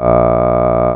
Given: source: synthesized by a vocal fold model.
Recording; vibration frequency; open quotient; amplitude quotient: sustained vowel; 60 Hz; 0.3; 1.4